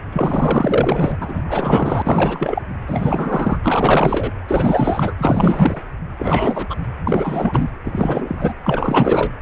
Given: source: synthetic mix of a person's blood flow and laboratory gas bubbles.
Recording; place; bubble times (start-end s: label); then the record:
Doppler ultrasound of blood flow; precordium
0.12-1.17 s: bubbles
1.21-1.42 s: bubbles
1.47-2.62 s: bubbles
2.87-3.58 s: bubbles
3.63-4.31 s: bubbles
4.48-5.15 s: bubbles
5.17-5.82 s: bubbles
6.17-6.77 s: bubbles
7.07-7.71 s: bubbles
7.84-8.54 s: bubbles
8.64-9.33 s: bubbles
From the record:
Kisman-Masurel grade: 444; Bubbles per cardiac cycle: continuous sound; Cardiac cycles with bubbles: 100%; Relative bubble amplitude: maximal (0.775 to 0.999); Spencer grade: 4 (maximum detectable bubble signal sounding continuously throughout systole and diastole of every cardiac period, and overriding the amplitude of the normal cardiac signals); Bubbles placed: anywhere in the cardiac cycle